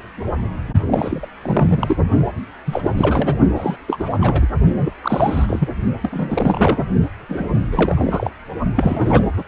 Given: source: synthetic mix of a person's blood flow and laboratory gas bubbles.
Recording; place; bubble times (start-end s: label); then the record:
Doppler ultrasound of blood flow; precordium
0.79-1.28 s: bubbles
1.43-1.96 s: bubbles
2.66-2.90 s: bubbles
2.97-3.40 s: bubbles
3.56-3.77 s: bubbles
3.87-4.18 s: bubbles
4.21-4.47 s: bubbles
4.77-4.92 s: bubbles
5.02-5.69 s: bubbles
6.03-6.85 s: bubbles
7.29-7.47 s: bubbles
7.72-8.30 s: bubbles
8.76-9.24 s: bubbles
9.37-9.44 s: bubbles
From the record:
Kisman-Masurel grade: 333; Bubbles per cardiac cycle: rolling drumbeat, 9 or more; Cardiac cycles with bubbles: 50 to 99%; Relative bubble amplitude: loud (0.450 to 0.775); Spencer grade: 3 (all of the cardiac periods contain showers or single bubble signals, but not dominating or overriding the cardiac motion signals); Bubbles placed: only in the low amplitude regions of the cardiac cycle